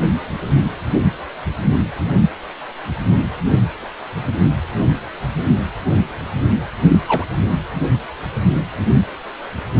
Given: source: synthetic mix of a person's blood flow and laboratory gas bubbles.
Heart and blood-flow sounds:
Doppler ultrasound of blood flow; precordium
6.88-7.00 s: bubbles
7.07-7.25 s: bubbles
From the record:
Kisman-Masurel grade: 113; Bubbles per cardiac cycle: 1 to 2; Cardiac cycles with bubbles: 1 to 10%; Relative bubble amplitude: loud (0.450 to 0.775); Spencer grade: 1 (occasional bubble signal discernible with the cardiac motion signal, with majority of cardiac periods free of bubbles); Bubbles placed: anywhere in the cardiac cycle

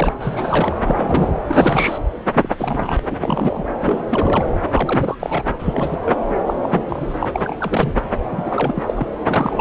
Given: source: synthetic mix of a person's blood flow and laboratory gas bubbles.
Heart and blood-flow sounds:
Doppler ultrasound of blood flow; subclavian vein
0.00-0.14 s: bubbles
0.20-0.76 s: bubbles
0.85-1.32 s: bubbles
1.47-1.98 s: bubbles
2.33-2.55 s: bubbles
2.58-3.01 s: bubbles
3.10-3.63 s: bubbles
3.80-4.07 s: bubbles
4.10-4.45 s: bubbles
4.68-5.15 s: bubbles
5.19-5.43 s: bubbles
5.47-5.54 s: bubbles
5.59-5.98 s: bubbles
6.05-6.13 s: bubbles
6.47-6.56 s: bubbles
6.62-6.83 s: bubbles
6.88-7.30 s: bubbles
7.33-7.93 s: bubbles
8.31-9.07 s: bubbles
9.29-9.61 s: bubbles
From the record:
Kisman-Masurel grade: 342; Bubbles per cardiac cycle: rolling drumbeat, 9 or more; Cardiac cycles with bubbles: 100%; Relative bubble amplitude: moderate (0.250 to 0.450); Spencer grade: 3 (all of the cardiac periods contain showers or single bubble signals, but not dominating or overriding the cardiac motion signals); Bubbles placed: anywhere in the cardiac cycle

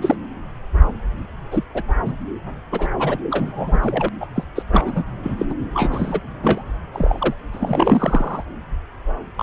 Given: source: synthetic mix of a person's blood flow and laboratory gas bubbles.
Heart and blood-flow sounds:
Doppler ultrasound of blood flow; subclavian vein
0.01-0.16 s: bubbles
1.50-1.64 s: bubbles
1.74-1.82 s: bubbles
2.06-2.13 s: bubbles
2.72-2.89 s: bubbles
2.98-3.18 s: bubbles
3.31-3.79 s: bubbles
3.82-4.08 s: bubbles
4.20-4.27 s: bubbles
4.36-4.45 s: bubbles
4.55-4.62 s: bubbles
4.71-5.03 s: bubbles
5.23-5.35 s: bubbles
5.38-5.46 s: bubbles
5.49-5.54 s: bubbles
5.74-6.20 s: bubbles
6.43-6.62 s: bubbles
6.93-7.34 s: bubbles
7.53-8.44 s: bubbles
9.37-9.43 s: bubbles
From the record:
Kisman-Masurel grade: 242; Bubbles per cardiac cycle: several, 3 to 8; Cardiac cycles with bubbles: 100%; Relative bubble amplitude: moderate (0.250 to 0.450); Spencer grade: 3 (all of the cardiac periods contain showers or single bubble signals, but not dominating or overriding the cardiac motion signals); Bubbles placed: anywhere in the cardiac cycle

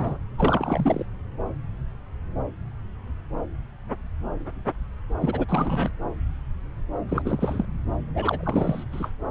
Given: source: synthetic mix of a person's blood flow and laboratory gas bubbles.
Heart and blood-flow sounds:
Doppler ultrasound of blood flow; subclavian vein
0.00-0.18 s: bubbles
0.38-1.04 s: bubbles
5.21-5.46 s: bubbles
5.48-5.89 s: bubbles
7.09-7.65 s: bubbles
8.14-8.84 s: bubbles
8.92-9.09 s: bubbles
From the record:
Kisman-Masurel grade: 332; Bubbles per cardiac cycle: rolling drumbeat, 9 or more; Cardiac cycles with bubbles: 50 to 99%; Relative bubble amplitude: moderate (0.250 to 0.450); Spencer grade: 3 (all of the cardiac periods contain showers or single bubble signals, but not dominating or overriding the cardiac motion signals); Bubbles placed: anywhere in the cardiac cycle

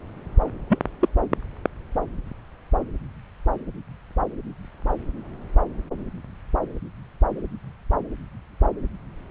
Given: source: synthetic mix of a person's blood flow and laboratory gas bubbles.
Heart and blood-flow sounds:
Doppler ultrasound of blood flow; subclavian vein
0.69-0.79 s: bubbles
1.01-1.08 s: bubbles
From the record:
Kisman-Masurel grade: 112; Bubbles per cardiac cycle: 1 to 2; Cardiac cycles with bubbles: 1 to 10%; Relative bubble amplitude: moderate (0.250 to 0.450); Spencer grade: 1 (occasional bubble signal discernible with the cardiac motion signal, with majority of cardiac periods free of bubbles); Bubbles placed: anywhere in the cardiac cycle

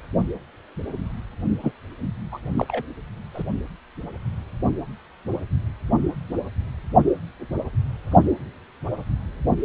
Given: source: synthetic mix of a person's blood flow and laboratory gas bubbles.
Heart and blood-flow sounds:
Doppler ultrasound of blood flow; precordium
1.62-1.72 s: bubbles
2.31-2.38 s: bubbles
2.57-2.82 s: bubbles
3.34-3.44 s: bubbles
From the record:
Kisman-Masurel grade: 212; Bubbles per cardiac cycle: several, 3 to 8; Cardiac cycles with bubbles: 1 to 10%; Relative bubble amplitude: moderate (0.250 to 0.450); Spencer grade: 1 (occasional bubble signal discernible with the cardiac motion signal, with majority of cardiac periods free of bubbles); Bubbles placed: only in the low amplitude regions of the cardiac cycle

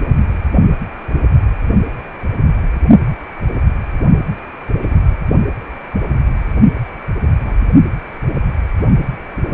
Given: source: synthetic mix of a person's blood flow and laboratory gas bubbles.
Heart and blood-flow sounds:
Doppler ultrasound of blood flow; precordium
4.81-4.95 s: bubbles
6.74-6.81 s: bubbles
7.45-7.58 s: bubbles
From the record:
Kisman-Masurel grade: 121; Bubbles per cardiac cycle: 1 to 2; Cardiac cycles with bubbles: 10 to 50%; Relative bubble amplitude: barely perceptible (0.100 to 0.250); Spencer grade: 2 (many but less than half of the cardiac periods contain bubble signals, singularly or in groups); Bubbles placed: only in the low amplitude regions of the cardiac cycle

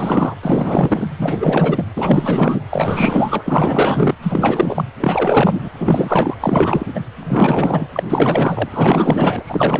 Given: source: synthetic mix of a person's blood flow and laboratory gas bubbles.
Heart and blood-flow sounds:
Doppler ultrasound of blood flow; precordium
0.00-0.35 s: bubbles
0.42-1.08 s: bubbles
1.18-1.84 s: bubbles
1.96-2.64 s: bubbles
2.70-4.14 s: bubbles
4.22-4.84 s: bubbles
5.00-5.68 s: bubbles
5.79-6.35 s: bubbles
6.41-6.86 s: bubbles
6.94-7.00 s: bubbles
7.18-7.86 s: bubbles
7.92-8.03 s: bubbles
8.09-9.80 s: bubbles
From the record:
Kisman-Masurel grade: 444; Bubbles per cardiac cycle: continuous sound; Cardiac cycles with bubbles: 100%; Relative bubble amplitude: maximal (0.775 to 0.999); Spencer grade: 4 (maximum detectable bubble signal sounding continuously throughout systole and diastole of every cardiac period, and overriding the amplitude of the normal cardiac signals); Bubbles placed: anywhere in the cardiac cycle

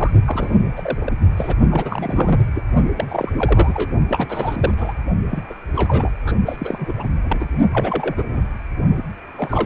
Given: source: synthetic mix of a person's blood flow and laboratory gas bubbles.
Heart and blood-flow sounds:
Doppler ultrasound of blood flow; precordium
0.00-0.10 s: bubbles
0.26-0.58 s: bubbles
0.76-1.12 s: bubbles
1.36-1.55 s: bubbles
1.71-2.41 s: bubbles
2.55-2.62 s: bubbles
2.98-3.30 s: bubbles
3.38-3.91 s: bubbles
4.09-4.74 s: bubbles
4.77-4.93 s: bubbles
5.31-5.43 s: bubbles
5.50-5.54 s: bubbles
5.75-6.10 s: bubbles
6.25-6.32 s: bubbles
6.46-6.93 s: bubbles
6.97-7.46 s: bubbles
7.72-8.46 s: bubbles
8.96-9.03 s: bubbles
9.37-9.66 s: bubbles
From the record:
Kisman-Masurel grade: 342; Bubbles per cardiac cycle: rolling drumbeat, 9 or more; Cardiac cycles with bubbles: 100%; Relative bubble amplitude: moderate (0.250 to 0.450); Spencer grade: 3 (all of the cardiac periods contain showers or single bubble signals, but not dominating or overriding the cardiac motion signals); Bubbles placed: only in the low amplitude regions of the cardiac cycle

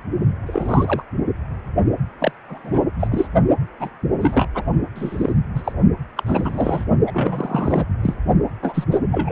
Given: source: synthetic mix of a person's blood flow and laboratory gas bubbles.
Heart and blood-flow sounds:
Doppler ultrasound of blood flow; precordium
0.47-1.02 s: bubbles
2.19-2.31 s: bubbles
2.48-2.79 s: bubbles
3.00-3.07 s: bubbles
3.10-3.28 s: bubbles
3.80-3.90 s: bubbles
4.21-4.46 s: bubbles
4.54-4.63 s: bubbles
4.95-5.33 s: bubbles
5.55-5.73 s: bubbles
6.17-6.23 s: bubbles
6.26-6.85 s: bubbles
7.07-7.85 s: bubbles
8.03-8.16 s: bubbles
8.62-8.84 s: bubbles
8.91-9.00 s: bubbles
9.12-9.32 s: bubbles
From the record:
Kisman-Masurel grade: 242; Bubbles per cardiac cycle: several, 3 to 8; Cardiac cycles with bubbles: 100%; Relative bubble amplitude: moderate (0.250 to 0.450); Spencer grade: 3 (all of the cardiac periods contain showers or single bubble signals, but not dominating or overriding the cardiac motion signals); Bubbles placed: only in the low amplitude regions of the cardiac cycle

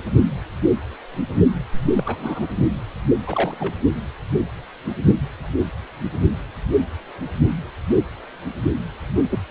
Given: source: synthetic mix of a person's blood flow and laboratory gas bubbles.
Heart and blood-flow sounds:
Doppler ultrasound of blood flow; precordium
1.96-2.02 s: bubbles
2.06-2.47 s: bubbles
3.27-3.56 s: bubbles
3.60-3.74 s: bubbles
9.29-9.38 s: bubbles
From the record:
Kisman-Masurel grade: 211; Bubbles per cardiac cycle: several, 3 to 8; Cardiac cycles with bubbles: 1 to 10%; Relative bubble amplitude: barely perceptible (0.100 to 0.250); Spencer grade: 1 (occasional bubble signal discernible with the cardiac motion signal, with majority of cardiac periods free of bubbles); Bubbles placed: anywhere in the cardiac cycle

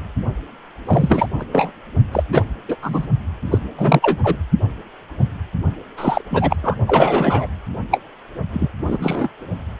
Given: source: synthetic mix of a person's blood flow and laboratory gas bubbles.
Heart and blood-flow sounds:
Doppler ultrasound of blood flow; precordium
0.85-1.27 s: bubbles
1.39-1.45 s: bubbles
1.52-1.70 s: bubbles
2.12-2.24 s: bubbles
2.31-2.42 s: bubbles
2.68-2.77 s: bubbles
2.82-3.08 s: bubbles
3.51-3.58 s: bubbles
3.77-4.17 s: bubbles
4.23-4.36 s: bubbles
5.97-6.21 s: bubbles
6.30-6.57 s: bubbles
6.63-6.75 s: bubbles
6.87-7.46 s: bubbles
7.91-8.00 s: bubbles
8.53-8.69 s: bubbles
8.87-9.28 s: bubbles
From the record:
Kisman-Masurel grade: 233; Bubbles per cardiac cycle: several, 3 to 8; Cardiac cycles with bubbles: 50 to 99%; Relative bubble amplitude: loud (0.450 to 0.775); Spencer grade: 3 (all of the cardiac periods contain showers or single bubble signals, but not dominating or overriding the cardiac motion signals); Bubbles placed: only in the low amplitude regions of the cardiac cycle

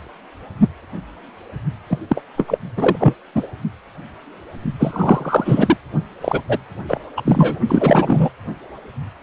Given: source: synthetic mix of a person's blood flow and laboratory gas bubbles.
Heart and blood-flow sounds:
Doppler ultrasound of blood flow; precordium
1.89-1.98 s: bubbles
2.09-2.22 s: bubbles
2.38-2.58 s: bubbles
2.77-2.96 s: bubbles
2.99-3.14 s: bubbles
3.35-3.47 s: bubbles
4.79-5.77 s: bubbles
6.21-6.41 s: bubbles
6.49-6.58 s: bubbles
6.88-7.01 s: bubbles
7.17-7.22 s: bubbles
7.25-7.59 s: bubbles
7.68-8.30 s: bubbles
From the record:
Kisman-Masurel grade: 333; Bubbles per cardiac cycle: rolling drumbeat, 9 or more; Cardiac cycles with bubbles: 50 to 99%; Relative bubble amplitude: loud (0.450 to 0.775); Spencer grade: 3 (all of the cardiac periods contain showers or single bubble signals, but not dominating or overriding the cardiac motion signals); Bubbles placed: only in the low amplitude regions of the cardiac cycle

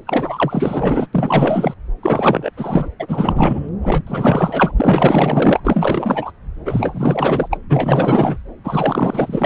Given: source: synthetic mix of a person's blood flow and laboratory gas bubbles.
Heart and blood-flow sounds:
Doppler ultrasound of blood flow; subclavian vein
0.07-1.06 s: bubbles
1.13-1.74 s: bubbles
2.02-2.50 s: bubbles
2.56-2.88 s: bubbles
3.00-3.69 s: bubbles
3.82-4.03 s: bubbles
4.07-4.72 s: bubbles
4.76-5.60 s: bubbles
5.64-6.32 s: bubbles
6.65-7.48 s: bubbles
7.51-7.59 s: bubbles
7.69-8.38 s: bubbles
8.63-9.46 s: bubbles
From the record:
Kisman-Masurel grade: 444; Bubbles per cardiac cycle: continuous sound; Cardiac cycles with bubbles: 100%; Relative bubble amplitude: maximal (0.775 to 0.999); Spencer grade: 4 (maximum detectable bubble signal sounding continuously throughout systole and diastole of every cardiac period, and overriding the amplitude of the normal cardiac signals); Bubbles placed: anywhere in the cardiac cycle

